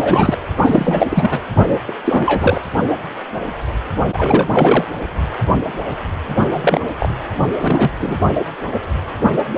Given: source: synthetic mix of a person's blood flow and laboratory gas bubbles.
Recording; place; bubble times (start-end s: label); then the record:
Doppler ultrasound of blood flow; precordium
0.00-0.36 s: bubbles
0.57-1.07 s: bubbles
1.09-1.40 s: bubbles
1.66-1.77 s: bubbles
1.87-1.92 s: bubbles
2.05-2.62 s: bubbles
4.12-4.85 s: bubbles
6.47-6.83 s: bubbles
7.00-7.15 s: bubbles
7.38-7.50 s: bubbles
7.58-7.91 s: bubbles
8.01-8.19 s: bubbles
From the record:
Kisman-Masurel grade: 333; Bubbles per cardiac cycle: rolling drumbeat, 9 or more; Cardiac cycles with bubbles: 50 to 99%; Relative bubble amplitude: loud (0.450 to 0.775); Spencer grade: 3 (all of the cardiac periods contain showers or single bubble signals, but not dominating or overriding the cardiac motion signals); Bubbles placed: only in the low amplitude regions of the cardiac cycle